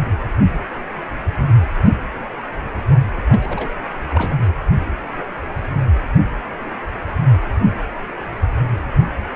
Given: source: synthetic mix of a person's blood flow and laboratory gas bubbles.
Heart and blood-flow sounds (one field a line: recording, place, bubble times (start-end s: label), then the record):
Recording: Doppler ultrasound of blood flow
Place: precordium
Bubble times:
3.15-3.23 s: bubbles
3.28-3.68 s: bubbles
4.10-4.34 s: bubbles
From the record:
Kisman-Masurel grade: 211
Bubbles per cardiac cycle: several, 3 to 8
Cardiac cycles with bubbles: 1 to 10%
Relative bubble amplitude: barely perceptible (0.100 to 0.250)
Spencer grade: 1 (occasional bubble signal discernible with the cardiac motion signal, with majority of cardiac periods free of bubbles)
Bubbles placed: anywhere in the cardiac cycle